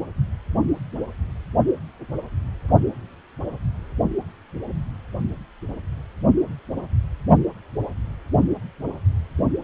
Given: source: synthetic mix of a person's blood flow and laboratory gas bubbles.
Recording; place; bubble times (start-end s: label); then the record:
Doppler ultrasound of blood flow; precordium
no bubbles
From the record:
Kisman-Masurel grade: 000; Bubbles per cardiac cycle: 0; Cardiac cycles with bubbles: 0%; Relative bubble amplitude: no bubbles discernible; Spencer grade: 0 (complete lack of bubble signals)